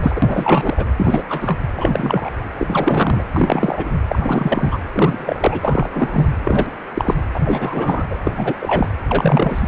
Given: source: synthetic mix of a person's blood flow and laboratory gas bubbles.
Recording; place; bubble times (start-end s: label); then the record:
Doppler ultrasound of blood flow; precordium
0.00-0.84 s: bubbles
0.97-1.23 s: bubbles
1.28-1.58 s: bubbles
1.76-2.30 s: bubbles
2.57-3.24 s: bubbles
3.32-3.92 s: bubbles
4.08-4.79 s: bubbles
4.94-5.60 s: bubbles
5.62-6.32 s: bubbles
6.40-6.71 s: bubbles
6.94-7.16 s: bubbles
7.33-7.40 s: bubbles
7.44-8.06 s: bubbles
8.10-8.19 s: bubbles
8.25-8.33 s: bubbles
8.35-8.89 s: bubbles
9.07-9.68 s: bubbles
From the record:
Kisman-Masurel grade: 343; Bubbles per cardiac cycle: rolling drumbeat, 9 or more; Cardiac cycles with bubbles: 100%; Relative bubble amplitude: loud (0.450 to 0.775); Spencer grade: 3 (all of the cardiac periods contain showers or single bubble signals, but not dominating or overriding the cardiac motion signals); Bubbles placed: anywhere in the cardiac cycle